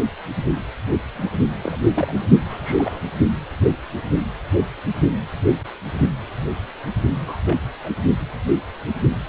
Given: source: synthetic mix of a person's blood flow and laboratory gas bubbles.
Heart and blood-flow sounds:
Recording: Doppler ultrasound of blood flow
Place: precordium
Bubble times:
1.14-1.39 s: bubbles
1.61-1.84 s: bubbles
1.94-2.25 s: bubbles
2.49-2.98 s: bubbles
3.23-3.29 s: bubbles
7.26-7.37 s: bubbles
7.45-7.57 s: bubbles
7.83-7.89 s: bubbles
From the record:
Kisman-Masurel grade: 221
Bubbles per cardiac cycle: several, 3 to 8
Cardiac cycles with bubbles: 10 to 50%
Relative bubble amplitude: barely perceptible (0.100 to 0.250)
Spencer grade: 2 (many but less than half of the cardiac periods contain bubble signals, singularly or in groups)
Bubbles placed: only in the low amplitude regions of the cardiac cycle

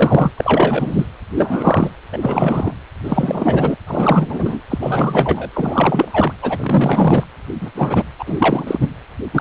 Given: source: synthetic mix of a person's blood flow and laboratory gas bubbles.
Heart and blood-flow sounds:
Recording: Doppler ultrasound of blood flow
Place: precordium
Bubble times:
0.00-0.31 s: bubbles
0.38-1.06 s: bubbles
1.35-1.91 s: bubbles
2.12-2.20 s: bubbles
2.22-2.74 s: bubbles
3.04-3.76 s: bubbles
3.87-4.60 s: bubbles
4.69-4.78 s: bubbles
4.81-5.49 s: bubbles
5.53-6.32 s: bubbles
6.42-7.24 s: bubbles
7.61-7.71 s: bubbles
7.74-8.05 s: bubbles
8.19-8.88 s: bubbles
9.33-9.41 s: bubbles
From the record:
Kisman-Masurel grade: 343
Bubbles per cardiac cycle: rolling drumbeat, 9 or more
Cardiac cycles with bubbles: 100%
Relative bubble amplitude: loud (0.450 to 0.775)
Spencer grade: 3 (all of the cardiac periods contain showers or single bubble signals, but not dominating or overriding the cardiac motion signals)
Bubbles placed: anywhere in the cardiac cycle

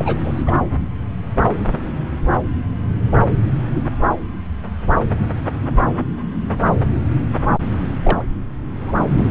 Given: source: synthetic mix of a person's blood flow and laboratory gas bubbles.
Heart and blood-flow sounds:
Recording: Doppler ultrasound of blood flow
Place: subclavian vein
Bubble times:
0.00-0.52 s: bubbles
8.03-8.21 s: bubbles
8.79-9.05 s: bubbles
9.12-9.30 s: bubbles
From the record:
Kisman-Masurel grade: 222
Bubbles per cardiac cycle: several, 3 to 8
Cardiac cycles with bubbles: 10 to 50%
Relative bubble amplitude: moderate (0.250 to 0.450)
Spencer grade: 2 (many but less than half of the cardiac periods contain bubble signals, singularly or in groups)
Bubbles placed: anywhere in the cardiac cycle

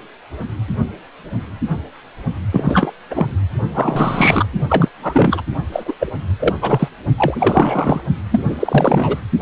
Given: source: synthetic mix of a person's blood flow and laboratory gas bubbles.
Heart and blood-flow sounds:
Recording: Doppler ultrasound of blood flow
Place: precordium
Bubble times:
2.51-2.92 s: bubbles
3.10-3.26 s: bubbles
3.74-4.46 s: bubbles
4.69-4.89 s: bubbles
5.02-5.42 s: bubbles
5.72-5.95 s: bubbles
6.00-6.12 s: bubbles
6.39-6.53 s: bubbles
6.61-6.88 s: bubbles
7.14-8.01 s: bubbles
8.31-8.42 s: bubbles
8.48-9.21 s: bubbles
From the record:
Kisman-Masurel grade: 333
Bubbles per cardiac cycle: rolling drumbeat, 9 or more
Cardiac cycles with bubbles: 50 to 99%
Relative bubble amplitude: loud (0.450 to 0.775)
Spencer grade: 3 (all of the cardiac periods contain showers or single bubble signals, but not dominating or overriding the cardiac motion signals)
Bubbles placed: only in the low amplitude regions of the cardiac cycle

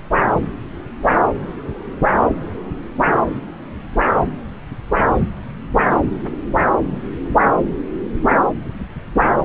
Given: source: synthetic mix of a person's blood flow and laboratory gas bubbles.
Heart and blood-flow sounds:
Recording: Doppler ultrasound of blood flow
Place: subclavian vein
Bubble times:
no bubbles
From the record:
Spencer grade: 0 (complete lack of bubble signals)

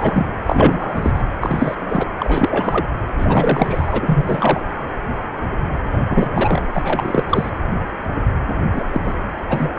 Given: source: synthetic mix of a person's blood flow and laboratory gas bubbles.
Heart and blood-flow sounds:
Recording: Doppler ultrasound of blood flow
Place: precordium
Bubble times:
0.00-0.26 s: bubbles
0.46-1.11 s: bubbles
1.14-1.23 s: bubbles
1.40-1.75 s: bubbles
1.79-2.09 s: bubbles
2.18-2.85 s: bubbles
3.17-4.71 s: bubbles
5.93-6.02 s: bubbles
6.10-6.68 s: bubbles
6.73-7.24 s: bubbles
7.29-7.50 s: bubbles
8.72-8.84 s: bubbles
8.92-9.01 s: bubbles
9.04-9.14 s: bubbles
9.49-9.70 s: bubbles
From the record:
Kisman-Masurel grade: 333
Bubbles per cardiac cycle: rolling drumbeat, 9 or more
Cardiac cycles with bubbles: 50 to 99%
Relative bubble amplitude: loud (0.450 to 0.775)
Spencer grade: 3 (all of the cardiac periods contain showers or single bubble signals, but not dominating or overriding the cardiac motion signals)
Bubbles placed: anywhere in the cardiac cycle

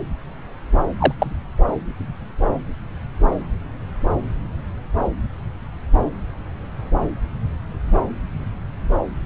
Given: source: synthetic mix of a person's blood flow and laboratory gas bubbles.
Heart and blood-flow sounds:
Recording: Doppler ultrasound of blood flow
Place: subclavian vein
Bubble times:
0.98-1.12 s: bubbles
1.20-1.32 s: bubbles
From the record:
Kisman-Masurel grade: 113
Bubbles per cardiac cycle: 1 to 2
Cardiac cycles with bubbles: 1 to 10%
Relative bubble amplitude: loud (0.450 to 0.775)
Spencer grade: 1 (occasional bubble signal discernible with the cardiac motion signal, with majority of cardiac periods free of bubbles)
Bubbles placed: anywhere in the cardiac cycle

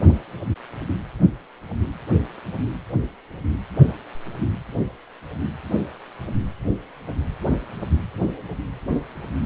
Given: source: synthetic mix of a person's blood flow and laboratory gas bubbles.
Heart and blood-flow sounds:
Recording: Doppler ultrasound of blood flow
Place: precordium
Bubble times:
no bubbles
From the record:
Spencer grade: 0 (complete lack of bubble signals)

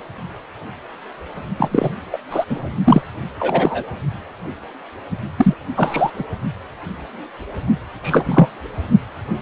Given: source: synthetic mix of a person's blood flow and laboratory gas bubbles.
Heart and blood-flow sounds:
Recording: Doppler ultrasound of blood flow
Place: precordium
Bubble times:
1.56-1.90 s: bubbles
2.12-2.18 s: bubbles
2.30-2.45 s: bubbles
2.50-2.71 s: bubbles
2.84-3.03 s: bubbles
3.40-3.83 s: bubbles
5.37-5.54 s: bubbles
5.75-6.12 s: bubbles
6.19-6.24 s: bubbles
8.03-8.47 s: bubbles
From the record:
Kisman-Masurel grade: 233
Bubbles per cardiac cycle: several, 3 to 8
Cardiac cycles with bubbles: 50 to 99%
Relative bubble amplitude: loud (0.450 to 0.775)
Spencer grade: 3 (all of the cardiac periods contain showers or single bubble signals, but not dominating or overriding the cardiac motion signals)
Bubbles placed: only in the low amplitude regions of the cardiac cycle

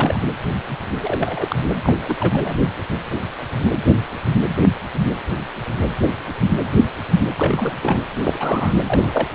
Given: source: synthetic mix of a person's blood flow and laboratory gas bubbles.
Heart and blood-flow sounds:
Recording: Doppler ultrasound of blood flow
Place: precordium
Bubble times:
0.00-0.20 s: bubbles
1.01-1.56 s: bubbles
1.82-1.94 s: bubbles
2.04-2.13 s: bubbles
2.19-2.56 s: bubbles
7.37-7.72 s: bubbles
7.81-8.00 s: bubbles
8.23-8.75 s: bubbles
8.87-9.28 s: bubbles
From the record:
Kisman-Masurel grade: 222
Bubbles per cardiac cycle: several, 3 to 8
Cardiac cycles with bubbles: 10 to 50%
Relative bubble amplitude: moderate (0.250 to 0.450)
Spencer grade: 2 (many but less than half of the cardiac periods contain bubble signals, singularly or in groups)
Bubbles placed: anywhere in the cardiac cycle

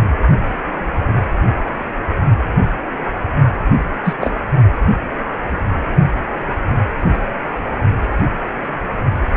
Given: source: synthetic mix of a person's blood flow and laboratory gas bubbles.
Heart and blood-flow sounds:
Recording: Doppler ultrasound of blood flow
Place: precordium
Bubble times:
4.04-4.14 s: bubbles
4.21-4.31 s: bubbles
From the record:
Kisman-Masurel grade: 123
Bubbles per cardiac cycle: 1 to 2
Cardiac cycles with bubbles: 10 to 50%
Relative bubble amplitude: loud (0.450 to 0.775)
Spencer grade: 2 (many but less than half of the cardiac periods contain bubble signals, singularly or in groups)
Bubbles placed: only in the low amplitude regions of the cardiac cycle

